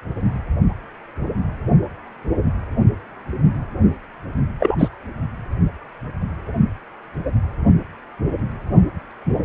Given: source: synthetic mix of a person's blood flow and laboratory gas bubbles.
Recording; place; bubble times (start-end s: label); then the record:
Doppler ultrasound of blood flow; precordium
4.59-4.75 s: bubbles
4.79-4.88 s: bubbles
From the record:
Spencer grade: 1 (occasional bubble signal discernible with the cardiac motion signal, with majority of cardiac periods free of bubbles); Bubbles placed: only in the low amplitude regions of the cardiac cycle